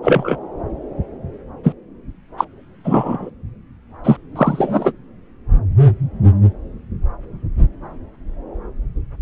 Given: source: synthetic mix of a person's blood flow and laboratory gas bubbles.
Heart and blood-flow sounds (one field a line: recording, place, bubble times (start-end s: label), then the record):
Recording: Doppler ultrasound of blood flow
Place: subclavian vein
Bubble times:
0.02-0.37 s: bubbles
1.63-1.73 s: bubbles
2.38-2.44 s: bubbles
2.84-3.29 s: bubbles
4.04-4.17 s: bubbles
4.36-4.92 s: bubbles
From the record:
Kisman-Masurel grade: 123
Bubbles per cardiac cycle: 1 to 2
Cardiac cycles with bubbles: 10 to 50%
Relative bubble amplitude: loud (0.450 to 0.775)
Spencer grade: 2 (many but less than half of the cardiac periods contain bubble signals, singularly or in groups)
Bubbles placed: anywhere in the cardiac cycle